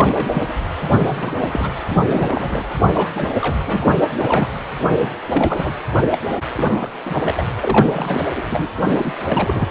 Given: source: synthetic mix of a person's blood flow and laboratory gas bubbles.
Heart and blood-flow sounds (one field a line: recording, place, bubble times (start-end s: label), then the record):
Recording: Doppler ultrasound of blood flow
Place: precordium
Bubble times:
0.00-0.45 s: bubbles
0.48-0.52 s: bubbles
0.92-1.73 s: bubbles
1.87-2.66 s: bubbles
2.82-2.89 s: bubbles
2.93-3.08 s: bubbles
3.14-3.34 s: bubbles
3.41-3.57 s: bubbles
3.67-4.00 s: bubbles
4.13-4.49 s: bubbles
4.79-5.11 s: bubbles
5.29-5.73 s: bubbles
6.11-6.18 s: bubbles
6.28-6.33 s: bubbles
6.57-6.88 s: bubbles
7.05-7.46 s: bubbles
7.61-7.93 s: bubbles
7.96-8.25 s: bubbles
8.35-8.44 s: bubbles
8.50-8.69 s: bubbles
8.77-9.13 s: bubbles
9.23-9.68 s: bubbles
From the record:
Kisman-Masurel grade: 342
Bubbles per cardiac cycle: rolling drumbeat, 9 or more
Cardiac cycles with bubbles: 100%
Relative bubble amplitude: moderate (0.250 to 0.450)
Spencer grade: 3 (all of the cardiac periods contain showers or single bubble signals, but not dominating or overriding the cardiac motion signals)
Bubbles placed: anywhere in the cardiac cycle